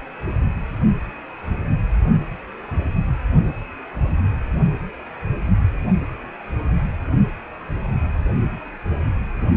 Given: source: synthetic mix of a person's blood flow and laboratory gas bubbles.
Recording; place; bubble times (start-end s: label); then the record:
Doppler ultrasound of blood flow; precordium
no bubbles
From the record:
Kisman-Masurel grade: 000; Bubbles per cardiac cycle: 0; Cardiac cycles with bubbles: 0%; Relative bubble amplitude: no bubbles discernible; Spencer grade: 0 (complete lack of bubble signals)